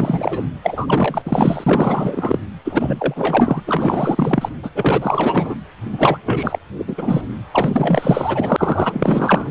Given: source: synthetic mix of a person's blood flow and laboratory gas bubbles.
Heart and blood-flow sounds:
Doppler ultrasound of blood flow; precordium
0.00-0.43 s: bubbles
0.62-1.22 s: bubbles
1.25-2.39 s: bubbles
2.65-3.61 s: bubbles
3.66-4.49 s: bubbles
4.63-4.70 s: bubbles
4.75-5.55 s: bubbles
5.92-6.18 s: bubbles
6.25-6.58 s: bubbles
6.78-7.26 s: bubbles
7.51-9.51 s: bubbles
From the record:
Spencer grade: 4 (maximum detectable bubble signal sounding continuously throughout systole and diastole of every cardiac period, and overriding the amplitude of the normal cardiac signals); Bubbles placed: anywhere in the cardiac cycle

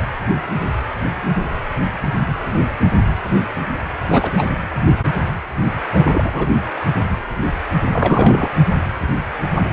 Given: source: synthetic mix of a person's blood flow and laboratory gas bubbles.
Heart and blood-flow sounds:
Doppler ultrasound of blood flow; precordium
3.96-4.32 s: bubbles
4.37-4.48 s: bubbles
5.94-6.50 s: bubbles
7.92-8.51 s: bubbles
From the record:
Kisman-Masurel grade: 223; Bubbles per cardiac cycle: several, 3 to 8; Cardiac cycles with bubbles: 10 to 50%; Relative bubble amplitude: loud (0.450 to 0.775); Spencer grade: 2 (many but less than half of the cardiac periods contain bubble signals, singularly or in groups); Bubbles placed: anywhere in the cardiac cycle

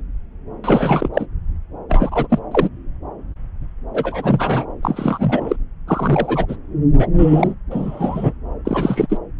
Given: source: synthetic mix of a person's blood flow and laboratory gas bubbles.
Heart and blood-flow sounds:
Doppler ultrasound of blood flow; subclavian vein
0.64-1.08 s: bubbles
1.14-1.26 s: bubbles
1.89-2.39 s: bubbles
2.51-2.69 s: bubbles
3.93-4.65 s: bubbles
4.83-5.56 s: bubbles
5.87-6.46 s: bubbles
6.48-6.56 s: bubbles
6.98-7.08 s: bubbles
7.18-7.54 s: bubbles
7.70-8.33 s: bubbles
8.65-9.07 s: bubbles
9.09-9.17 s: bubbles
From the record:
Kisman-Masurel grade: 233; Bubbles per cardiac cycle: several, 3 to 8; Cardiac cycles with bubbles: 50 to 99%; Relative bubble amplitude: loud (0.450 to 0.775); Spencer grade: 3 (all of the cardiac periods contain showers or single bubble signals, but not dominating or overriding the cardiac motion signals); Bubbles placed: anywhere in the cardiac cycle

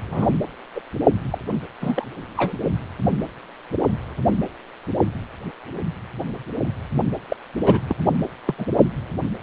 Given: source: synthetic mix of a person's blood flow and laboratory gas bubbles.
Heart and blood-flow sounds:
Doppler ultrasound of blood flow; precordium
0.10-0.27 s: bubbles
0.75-0.81 s: bubbles
1.31-1.38 s: bubbles
1.81-2.07 s: bubbles
2.36-2.53 s: bubbles
7.29-7.37 s: bubbles
7.60-7.80 s: bubbles
7.89-7.96 s: bubbles
8.45-8.54 s: bubbles
8.57-8.66 s: bubbles
From the record:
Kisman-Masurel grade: 222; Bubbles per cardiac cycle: several, 3 to 8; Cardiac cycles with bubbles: 10 to 50%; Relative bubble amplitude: moderate (0.250 to 0.450); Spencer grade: 2 (many but less than half of the cardiac periods contain bubble signals, singularly or in groups); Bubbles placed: only in the low amplitude regions of the cardiac cycle

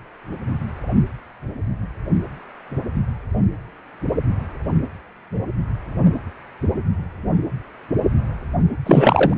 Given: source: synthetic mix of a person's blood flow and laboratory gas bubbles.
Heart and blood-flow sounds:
Doppler ultrasound of blood flow; precordium
8.86-9.34 s: bubbles
From the record:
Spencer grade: 1 (occasional bubble signal discernible with the cardiac motion signal, with majority of cardiac periods free of bubbles); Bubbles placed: anywhere in the cardiac cycle

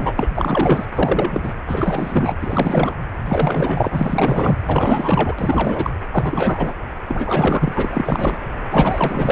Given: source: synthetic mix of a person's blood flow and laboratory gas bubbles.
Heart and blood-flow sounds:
Doppler ultrasound of blood flow; precordium
0.00-0.13 s: bubbles
0.15-0.28 s: bubbles
0.34-0.85 s: bubbles
0.95-1.52 s: bubbles
1.66-2.35 s: bubbles
2.42-2.94 s: bubbles
3.25-4.57 s: bubbles
4.63-5.35 s: bubbles
5.38-5.90 s: bubbles
6.11-6.73 s: bubbles
7.08-8.39 s: bubbles
8.70-9.32 s: bubbles
From the record:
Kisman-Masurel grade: 444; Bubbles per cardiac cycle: continuous sound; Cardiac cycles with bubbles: 100%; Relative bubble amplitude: maximal (0.775 to 0.999); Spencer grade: 4 (maximum detectable bubble signal sounding continuously throughout systole and diastole of every cardiac period, and overriding the amplitude of the normal cardiac signals); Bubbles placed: anywhere in the cardiac cycle

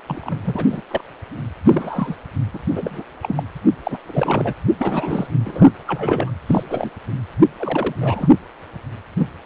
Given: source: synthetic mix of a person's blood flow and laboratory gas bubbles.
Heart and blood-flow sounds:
Doppler ultrasound of blood flow; precordium
0.07-0.36 s: bubbles
0.43-0.66 s: bubbles
0.70-0.81 s: bubbles
0.91-1.01 s: bubbles
1.65-2.16 s: bubbles
2.54-2.59 s: bubbles
2.70-3.03 s: bubbles
3.22-3.43 s: bubbles
3.83-3.98 s: bubbles
4.05-4.54 s: bubbles
4.79-5.27 s: bubbles
5.45-5.71 s: bubbles
5.87-6.31 s: bubbles
6.46-6.63 s: bubbles
6.69-6.91 s: bubbles
7.58-7.96 s: bubbles
8.00-8.29 s: bubbles
9.17-9.29 s: bubbles
From the record:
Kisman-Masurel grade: 242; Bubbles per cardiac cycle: several, 3 to 8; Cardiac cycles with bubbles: 100%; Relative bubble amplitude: moderate (0.250 to 0.450); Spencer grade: 3 (all of the cardiac periods contain showers or single bubble signals, but not dominating or overriding the cardiac motion signals); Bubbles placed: anywhere in the cardiac cycle

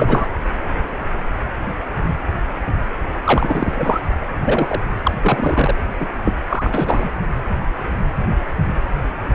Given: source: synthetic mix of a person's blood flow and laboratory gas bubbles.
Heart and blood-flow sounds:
Doppler ultrasound of blood flow; precordium
0.00-0.28 s: bubbles
3.24-4.00 s: bubbles
4.40-4.80 s: bubbles
5.03-5.13 s: bubbles
5.21-5.75 s: bubbles
5.99-6.07 s: bubbles
6.24-6.33 s: bubbles
6.49-7.09 s: bubbles
From the record:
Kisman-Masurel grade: 233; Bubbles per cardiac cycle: several, 3 to 8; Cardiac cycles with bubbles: 50 to 99%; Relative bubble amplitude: loud (0.450 to 0.775); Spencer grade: 3 (all of the cardiac periods contain showers or single bubble signals, but not dominating or overriding the cardiac motion signals); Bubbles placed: anywhere in the cardiac cycle

